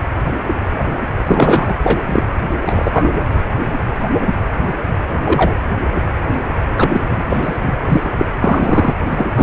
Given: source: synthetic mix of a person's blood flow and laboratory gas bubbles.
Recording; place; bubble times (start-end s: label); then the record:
Doppler ultrasound of blood flow; precordium
1.26-1.76 s: bubbles
1.83-2.23 s: bubbles
2.67-3.09 s: bubbles
5.24-5.55 s: bubbles
6.77-7.04 s: bubbles
7.08-7.24 s: bubbles
7.29-7.59 s: bubbles
7.63-7.74 s: bubbles
7.89-8.09 s: bubbles
8.18-8.25 s: bubbles
8.39-8.94 s: bubbles
9.09-9.25 s: bubbles
9.34-9.43 s: bubbles
From the record:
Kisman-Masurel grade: 223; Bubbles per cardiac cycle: several, 3 to 8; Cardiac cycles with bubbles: 10 to 50%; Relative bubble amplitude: loud (0.450 to 0.775); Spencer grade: 2 (many but less than half of the cardiac periods contain bubble signals, singularly or in groups); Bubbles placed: anywhere in the cardiac cycle